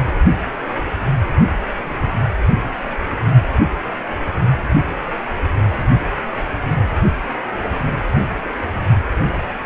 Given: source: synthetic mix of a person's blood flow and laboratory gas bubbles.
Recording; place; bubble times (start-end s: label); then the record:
Doppler ultrasound of blood flow; precordium
no bubbles
From the record:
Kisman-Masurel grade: 000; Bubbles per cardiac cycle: 0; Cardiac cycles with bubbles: 0%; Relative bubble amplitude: no bubbles discernible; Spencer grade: 0 (complete lack of bubble signals)